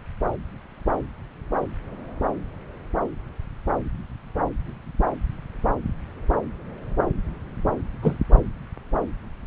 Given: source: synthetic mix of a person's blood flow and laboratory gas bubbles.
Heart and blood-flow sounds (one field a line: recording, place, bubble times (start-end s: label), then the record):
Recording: Doppler ultrasound of blood flow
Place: subclavian vein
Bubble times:
8.02-8.16 s: bubbles
From the record:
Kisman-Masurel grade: 112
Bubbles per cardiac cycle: 1 to 2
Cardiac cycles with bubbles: 1 to 10%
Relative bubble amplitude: moderate (0.250 to 0.450)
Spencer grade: 1 (occasional bubble signal discernible with the cardiac motion signal, with majority of cardiac periods free of bubbles)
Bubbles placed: anywhere in the cardiac cycle